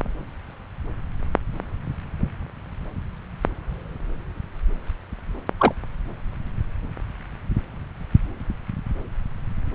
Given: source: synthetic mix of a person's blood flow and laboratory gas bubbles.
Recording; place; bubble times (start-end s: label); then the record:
Doppler ultrasound of blood flow; subclavian vein
5.59-5.74 s: bubbles
From the record:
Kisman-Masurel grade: 113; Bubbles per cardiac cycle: 1 to 2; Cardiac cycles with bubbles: 1 to 10%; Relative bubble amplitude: loud (0.450 to 0.775); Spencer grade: 1 (occasional bubble signal discernible with the cardiac motion signal, with majority of cardiac periods free of bubbles); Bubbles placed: anywhere in the cardiac cycle